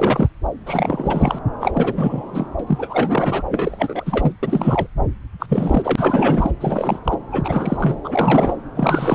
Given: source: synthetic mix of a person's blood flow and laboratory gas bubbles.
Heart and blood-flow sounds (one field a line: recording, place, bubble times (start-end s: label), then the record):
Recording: Doppler ultrasound of blood flow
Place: subclavian vein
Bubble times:
0.00-0.28 s: bubbles
0.66-1.39 s: bubbles
1.60-2.46 s: bubbles
2.59-2.63 s: bubbles
2.67-3.43 s: bubbles
3.50-4.32 s: bubbles
4.43-4.87 s: bubbles
5.39-5.46 s: bubbles
5.48-6.51 s: bubbles
6.60-6.99 s: bubbles
7.04-7.18 s: bubbles
7.32-7.97 s: bubbles
8.04-8.55 s: bubbles
8.74-9.15 s: bubbles
From the record:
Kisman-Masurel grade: 343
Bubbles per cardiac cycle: rolling drumbeat, 9 or more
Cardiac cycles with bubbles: 100%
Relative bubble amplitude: loud (0.450 to 0.775)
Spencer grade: 3 (all of the cardiac periods contain showers or single bubble signals, but not dominating or overriding the cardiac motion signals)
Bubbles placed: anywhere in the cardiac cycle